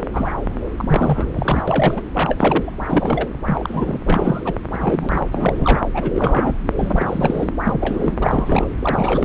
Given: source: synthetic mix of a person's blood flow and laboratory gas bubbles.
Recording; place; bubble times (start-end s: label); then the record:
Doppler ultrasound of blood flow; subclavian vein
0.00-0.05 s: bubbles
0.13-0.40 s: bubbles
0.77-1.29 s: bubbles
1.34-1.64 s: bubbles
1.68-2.01 s: bubbles
2.15-2.75 s: bubbles
2.79-3.29 s: bubbles
3.46-3.99 s: bubbles
4.06-4.54 s: bubbles
4.72-5.27 s: bubbles
5.32-5.83 s: bubbles
5.94-6.53 s: bubbles
6.75-7.50 s: bubbles
7.64-8.13 s: bubbles
8.22-8.68 s: bubbles
8.79-9.25 s: bubbles
From the record:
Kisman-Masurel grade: 342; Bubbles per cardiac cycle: rolling drumbeat, 9 or more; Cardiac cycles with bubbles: 100%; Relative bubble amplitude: moderate (0.250 to 0.450); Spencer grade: 3 (all of the cardiac periods contain showers or single bubble signals, but not dominating or overriding the cardiac motion signals); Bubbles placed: anywhere in the cardiac cycle